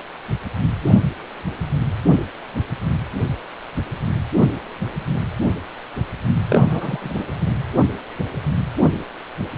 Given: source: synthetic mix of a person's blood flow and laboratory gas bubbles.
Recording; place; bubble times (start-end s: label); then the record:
Doppler ultrasound of blood flow; precordium
6.48-7.15 s: bubbles
7.17-7.24 s: bubbles
From the record:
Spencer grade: 1 (occasional bubble signal discernible with the cardiac motion signal, with majority of cardiac periods free of bubbles); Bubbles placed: anywhere in the cardiac cycle